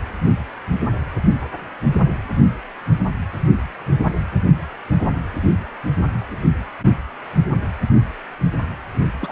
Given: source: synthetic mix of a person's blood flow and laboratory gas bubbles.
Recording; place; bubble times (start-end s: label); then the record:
Doppler ultrasound of blood flow; precordium
9.21-9.32 s: bubbles
From the record:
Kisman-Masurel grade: 211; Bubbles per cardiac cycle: several, 3 to 8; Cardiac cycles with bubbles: 1 to 10%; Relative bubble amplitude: barely perceptible (0.100 to 0.250); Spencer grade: 1 (occasional bubble signal discernible with the cardiac motion signal, with majority of cardiac periods free of bubbles); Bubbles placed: only in the low amplitude regions of the cardiac cycle